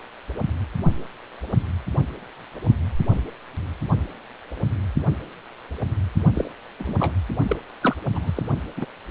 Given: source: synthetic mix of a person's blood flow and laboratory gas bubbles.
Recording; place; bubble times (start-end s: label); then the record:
Doppler ultrasound of blood flow; precordium
6.33-6.51 s: bubbles
6.78-6.95 s: bubbles
6.99-7.14 s: bubbles
7.48-7.56 s: bubbles
7.81-7.96 s: bubbles
8.14-8.31 s: bubbles
8.35-8.43 s: bubbles
8.76-8.85 s: bubbles
From the record:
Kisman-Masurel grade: 221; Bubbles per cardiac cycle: several, 3 to 8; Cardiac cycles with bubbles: 10 to 50%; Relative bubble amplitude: barely perceptible (0.100 to 0.250); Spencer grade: 2 (many but less than half of the cardiac periods contain bubble signals, singularly or in groups); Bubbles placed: only in the low amplitude regions of the cardiac cycle